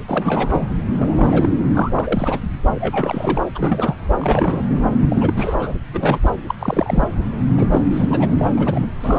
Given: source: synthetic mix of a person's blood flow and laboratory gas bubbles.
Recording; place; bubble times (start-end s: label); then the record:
Doppler ultrasound of blood flow; subclavian vein
0.08-0.67 s: bubbles
0.98-1.65 s: bubbles
1.75-1.91 s: bubbles
1.96-2.41 s: bubbles
2.75-3.44 s: bubbles
3.54-3.95 s: bubbles
4.20-4.64 s: bubbles
4.69-4.83 s: bubbles
5.09-5.74 s: bubbles
5.93-6.20 s: bubbles
6.24-6.33 s: bubbles
6.48-6.54 s: bubbles
6.59-7.07 s: bubbles
7.57-7.67 s: bubbles
7.71-7.81 s: bubbles
7.92-8.53 s: bubbles
8.57-8.88 s: bubbles
9.00-9.19 s: bubbles
From the record:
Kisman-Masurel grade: 342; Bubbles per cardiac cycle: rolling drumbeat, 9 or more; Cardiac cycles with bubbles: 100%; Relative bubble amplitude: moderate (0.250 to 0.450); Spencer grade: 3 (all of the cardiac periods contain showers or single bubble signals, but not dominating or overriding the cardiac motion signals); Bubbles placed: anywhere in the cardiac cycle